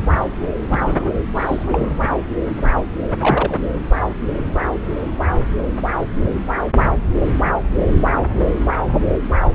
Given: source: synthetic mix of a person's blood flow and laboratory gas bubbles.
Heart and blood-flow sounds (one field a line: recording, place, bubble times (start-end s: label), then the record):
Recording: Doppler ultrasound of blood flow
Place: subclavian vein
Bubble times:
0.69-1.21 s: bubbles
1.35-1.90 s: bubbles
3.21-3.60 s: bubbles
From the record:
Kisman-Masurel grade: 222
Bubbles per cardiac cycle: several, 3 to 8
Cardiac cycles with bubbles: 10 to 50%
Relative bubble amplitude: moderate (0.250 to 0.450)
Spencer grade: 2 (many but less than half of the cardiac periods contain bubble signals, singularly or in groups)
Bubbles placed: anywhere in the cardiac cycle